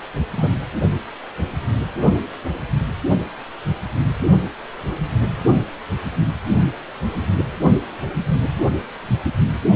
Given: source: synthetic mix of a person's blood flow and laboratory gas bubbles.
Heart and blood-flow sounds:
Doppler ultrasound of blood flow; precordium
0.37-0.48 s: bubbles
From the record:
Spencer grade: 1 (occasional bubble signal discernible with the cardiac motion signal, with majority of cardiac periods free of bubbles); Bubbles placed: only in the low amplitude regions of the cardiac cycle

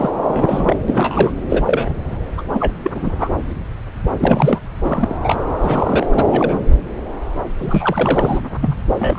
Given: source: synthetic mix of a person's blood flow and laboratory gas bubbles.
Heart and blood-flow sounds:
Doppler ultrasound of blood flow; subclavian vein
0.00-0.11 s: bubbles
0.27-0.78 s: bubbles
0.88-1.32 s: bubbles
1.49-1.63 s: bubbles
1.66-1.93 s: bubbles
2.38-2.42 s: bubbles
2.53-2.73 s: bubbles
2.83-3.29 s: bubbles
4.18-4.59 s: bubbles
4.85-5.16 s: bubbles
5.23-5.36 s: bubbles
5.57-6.06 s: bubbles
6.14-6.58 s: bubbles
7.59-8.38 s: bubbles
8.61-8.75 s: bubbles
8.98-9.19 s: bubbles
From the record:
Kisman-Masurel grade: 233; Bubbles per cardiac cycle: several, 3 to 8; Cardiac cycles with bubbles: 50 to 99%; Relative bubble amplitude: loud (0.450 to 0.775); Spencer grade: 3 (all of the cardiac periods contain showers or single bubble signals, but not dominating or overriding the cardiac motion signals); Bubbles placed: anywhere in the cardiac cycle

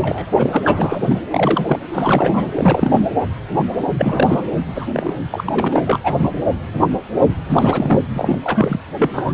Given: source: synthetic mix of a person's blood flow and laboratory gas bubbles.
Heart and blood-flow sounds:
Doppler ultrasound of blood flow; precordium
0.00-0.27 s: bubbles
0.36-0.58 s: bubbles
0.64-1.21 s: bubbles
1.30-1.80 s: bubbles
1.92-2.51 s: bubbles
2.55-3.13 s: bubbles
3.98-4.43 s: bubbles
4.75-4.88 s: bubbles
4.93-5.15 s: bubbles
5.30-5.83 s: bubbles
5.85-5.99 s: bubbles
6.04-6.14 s: bubbles
6.18-6.33 s: bubbles
7.49-8.01 s: bubbles
8.16-8.38 s: bubbles
8.44-8.79 s: bubbles
8.99-9.10 s: bubbles
9.13-9.33 s: bubbles
From the record:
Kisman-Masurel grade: 333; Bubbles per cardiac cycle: rolling drumbeat, 9 or more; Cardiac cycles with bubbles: 50 to 99%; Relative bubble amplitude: loud (0.450 to 0.775); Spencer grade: 3 (all of the cardiac periods contain showers or single bubble signals, but not dominating or overriding the cardiac motion signals); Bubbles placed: anywhere in the cardiac cycle

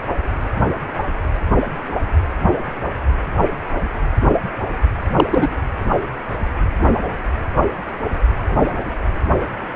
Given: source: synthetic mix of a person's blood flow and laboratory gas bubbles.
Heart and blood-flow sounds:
Doppler ultrasound of blood flow; precordium
5.16-5.25 s: bubbles
5.31-5.50 s: bubbles
From the record:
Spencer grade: 1 (occasional bubble signal discernible with the cardiac motion signal, with majority of cardiac periods free of bubbles); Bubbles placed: anywhere in the cardiac cycle

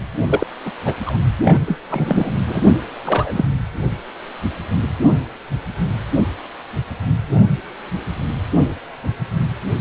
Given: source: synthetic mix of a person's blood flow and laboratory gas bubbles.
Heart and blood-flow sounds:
Doppler ultrasound of blood flow; precordium
0.28-0.47 s: bubbles
0.65-0.72 s: bubbles
0.85-0.94 s: bubbles
1.06-1.17 s: bubbles
1.43-1.60 s: bubbles
1.66-1.78 s: bubbles
1.90-2.32 s: bubbles
2.46-2.72 s: bubbles
3.04-3.45 s: bubbles
From the record:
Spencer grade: 2 (many but less than half of the cardiac periods contain bubble signals, singularly or in groups); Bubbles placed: anywhere in the cardiac cycle

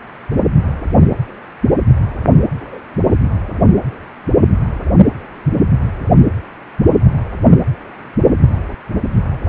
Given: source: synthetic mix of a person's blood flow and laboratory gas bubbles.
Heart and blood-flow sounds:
Doppler ultrasound of blood flow; precordium
2.60-2.79 s: bubbles
From the record:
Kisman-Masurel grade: 112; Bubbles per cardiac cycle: 1 to 2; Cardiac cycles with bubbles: 1 to 10%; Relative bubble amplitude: moderate (0.250 to 0.450); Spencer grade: 1 (occasional bubble signal discernible with the cardiac motion signal, with majority of cardiac periods free of bubbles); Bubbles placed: anywhere in the cardiac cycle

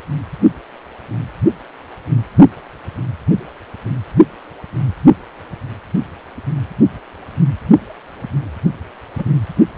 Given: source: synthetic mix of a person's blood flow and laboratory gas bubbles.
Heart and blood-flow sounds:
Doppler ultrasound of blood flow; precordium
9.18-9.25 s: bubbles
From the record:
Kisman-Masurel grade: 113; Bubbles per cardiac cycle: 1 to 2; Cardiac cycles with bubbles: 1 to 10%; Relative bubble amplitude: loud (0.450 to 0.775); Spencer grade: 1 (occasional bubble signal discernible with the cardiac motion signal, with majority of cardiac periods free of bubbles); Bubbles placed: only in the low amplitude regions of the cardiac cycle

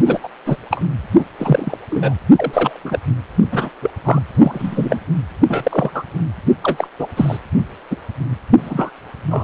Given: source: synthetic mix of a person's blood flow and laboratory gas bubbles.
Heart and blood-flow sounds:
Doppler ultrasound of blood flow; precordium
0.05-0.20 s: bubbles
0.23-0.29 s: bubbles
0.46-0.57 s: bubbles
0.71-0.83 s: bubbles
1.14-1.25 s: bubbles
1.39-1.77 s: bubbles
1.90-2.15 s: bubbles
2.34-2.80 s: bubbles
2.84-2.99 s: bubbles
3.52-3.70 s: bubbles
3.82-3.91 s: bubbles
4.05-4.21 s: bubbles
4.33-4.99 s: bubbles
5.48-5.91 s: bubbles
5.94-6.04 s: bubbles
6.62-6.88 s: bubbles
6.99-7.08 s: bubbles
7.17-7.37 s: bubbles
7.91-7.97 s: bubbles
8.58-8.91 s: bubbles
9.31-9.44 s: bubbles
From the record:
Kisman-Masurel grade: 243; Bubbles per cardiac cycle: several, 3 to 8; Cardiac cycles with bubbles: 100%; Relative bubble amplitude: loud (0.450 to 0.775); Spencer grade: 3 (all of the cardiac periods contain showers or single bubble signals, but not dominating or overriding the cardiac motion signals); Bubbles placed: anywhere in the cardiac cycle

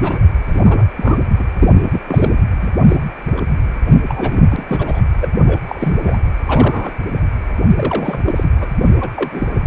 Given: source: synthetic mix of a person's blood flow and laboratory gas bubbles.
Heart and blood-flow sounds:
Doppler ultrasound of blood flow; precordium
0.00-0.21 s: bubbles
0.46-0.85 s: bubbles
0.97-1.18 s: bubbles
1.39-1.46 s: bubbles
1.59-1.74 s: bubbles
1.85-2.00 s: bubbles
2.07-2.31 s: bubbles
2.61-2.68 s: bubbles
2.89-2.96 s: bubbles
3.37-3.41 s: bubbles
4.09-4.47 s: bubbles
4.50-4.65 s: bubbles
4.69-5.01 s: bubbles
5.20-5.29 s: bubbles
5.46-5.59 s: bubbles
5.67-5.99 s: bubbles
6.04-6.17 s: bubbles
6.45-6.92 s: bubbles
7.77-8.20 s: bubbles
8.26-8.48 s: bubbles
8.60-8.68 s: bubbles
8.85-8.92 s: bubbles
9.01-9.11 s: bubbles
9.15-9.47 s: bubbles
9.55-9.62 s: bubbles
From the record:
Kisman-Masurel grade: 242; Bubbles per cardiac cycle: several, 3 to 8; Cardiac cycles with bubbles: 100%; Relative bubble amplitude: moderate (0.250 to 0.450); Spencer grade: 3 (all of the cardiac periods contain showers or single bubble signals, but not dominating or overriding the cardiac motion signals); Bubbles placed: anywhere in the cardiac cycle

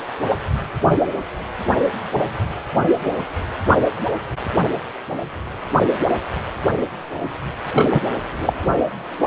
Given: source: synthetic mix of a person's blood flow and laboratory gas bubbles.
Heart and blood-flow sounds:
Doppler ultrasound of blood flow; precordium
7.73-8.02 s: bubbles
8.46-8.54 s: bubbles
From the record:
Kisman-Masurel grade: 213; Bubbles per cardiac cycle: several, 3 to 8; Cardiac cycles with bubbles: 1 to 10%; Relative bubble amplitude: loud (0.450 to 0.775); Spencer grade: 1 (occasional bubble signal discernible with the cardiac motion signal, with majority of cardiac periods free of bubbles); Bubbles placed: anywhere in the cardiac cycle

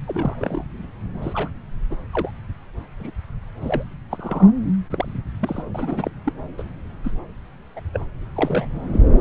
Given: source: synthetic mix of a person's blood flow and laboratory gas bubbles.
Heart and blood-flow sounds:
Doppler ultrasound of blood flow; subclavian vein
0.07-0.64 s: bubbles
1.22-1.49 s: bubbles
1.90-1.96 s: bubbles
2.12-2.31 s: bubbles
3.00-3.10 s: bubbles
3.61-3.84 s: bubbles
4.10-4.51 s: bubbles
4.91-5.07 s: bubbles
5.39-5.63 s: bubbles
5.75-6.10 s: bubbles
6.24-6.33 s: bubbles
6.58-6.63 s: bubbles
7.04-7.12 s: bubbles
7.76-7.81 s: bubbles
7.92-8.06 s: bubbles
8.35-9.03 s: bubbles
From the record:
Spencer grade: 3 (all of the cardiac periods contain showers or single bubble signals, but not dominating or overriding the cardiac motion signals); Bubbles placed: anywhere in the cardiac cycle

